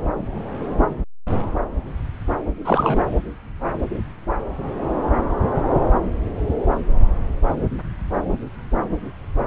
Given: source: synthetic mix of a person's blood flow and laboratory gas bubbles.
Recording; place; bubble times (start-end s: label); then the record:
Doppler ultrasound of blood flow; subclavian vein
2.65-3.05 s: bubbles
From the record:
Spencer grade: 1 (occasional bubble signal discernible with the cardiac motion signal, with majority of cardiac periods free of bubbles); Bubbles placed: anywhere in the cardiac cycle